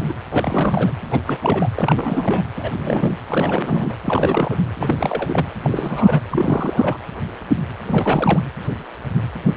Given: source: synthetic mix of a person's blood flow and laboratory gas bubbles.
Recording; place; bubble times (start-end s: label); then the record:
Doppler ultrasound of blood flow; precordium
0.00-0.04 s: bubbles
0.09-0.13 s: bubbles
0.31-0.92 s: bubbles
1.11-1.21 s: bubbles
1.25-1.38 s: bubbles
1.42-1.71 s: bubbles
1.75-2.46 s: bubbles
2.55-3.15 s: bubbles
3.29-3.93 s: bubbles
4.03-4.56 s: bubbles
4.76-5.45 s: bubbles
5.63-6.19 s: bubbles
6.30-6.97 s: bubbles
7.86-8.40 s: bubbles
From the record:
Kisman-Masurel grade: 332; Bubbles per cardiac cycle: rolling drumbeat, 9 or more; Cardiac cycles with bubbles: 50 to 99%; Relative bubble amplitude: moderate (0.250 to 0.450); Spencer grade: 3 (all of the cardiac periods contain showers or single bubble signals, but not dominating or overriding the cardiac motion signals); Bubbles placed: anywhere in the cardiac cycle